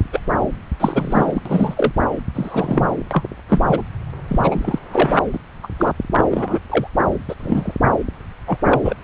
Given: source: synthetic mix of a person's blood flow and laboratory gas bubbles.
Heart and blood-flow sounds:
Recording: Doppler ultrasound of blood flow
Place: subclavian vein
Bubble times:
0.00-0.02 s: bubbles
0.12-0.20 s: bubbles
0.79-1.41 s: bubbles
1.46-1.93 s: bubbles
2.34-2.90 s: bubbles
3.11-3.23 s: bubbles
3.47-3.82 s: bubbles
4.29-4.79 s: bubbles
4.91-5.20 s: bubbles
5.33-5.39 s: bubbles
5.63-5.67 s: bubbles
5.79-5.92 s: bubbles
6.17-6.25 s: bubbles
6.31-6.60 s: bubbles
6.70-6.87 s: bubbles
7.29-7.35 s: bubbles
7.40-7.75 s: bubbles
8.47-8.58 s: bubbles
8.65-8.94 s: bubbles
From the record:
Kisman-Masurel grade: 243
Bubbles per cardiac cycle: several, 3 to 8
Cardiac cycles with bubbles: 100%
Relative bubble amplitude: loud (0.450 to 0.775)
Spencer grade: 3 (all of the cardiac periods contain showers or single bubble signals, but not dominating or overriding the cardiac motion signals)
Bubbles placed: anywhere in the cardiac cycle

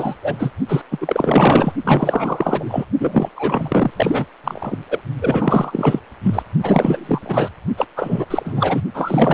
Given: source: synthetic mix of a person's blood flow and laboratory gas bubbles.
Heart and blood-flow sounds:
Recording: Doppler ultrasound of blood flow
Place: precordium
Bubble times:
0.00-0.14 s: bubbles
0.22-0.52 s: bubbles
0.68-0.82 s: bubbles
0.91-0.98 s: bubbles
1.01-1.73 s: bubbles
1.84-2.87 s: bubbles
2.99-3.29 s: bubbles
3.35-3.90 s: bubbles
3.96-4.25 s: bubbles
4.44-4.78 s: bubbles
4.90-5.01 s: bubbles
5.21-6.00 s: bubbles
6.23-6.42 s: bubbles
6.62-7.48 s: bubbles
7.77-7.86 s: bubbles
7.96-8.26 s: bubbles
8.30-8.82 s: bubbles
8.94-9.34 s: bubbles
From the record:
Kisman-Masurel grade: 444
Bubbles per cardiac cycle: continuous sound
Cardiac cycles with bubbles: 100%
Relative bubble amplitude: maximal (0.775 to 0.999)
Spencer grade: 4 (maximum detectable bubble signal sounding continuously throughout systole and diastole of every cardiac period, and overriding the amplitude of the normal cardiac signals)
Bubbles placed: only in the low amplitude regions of the cardiac cycle

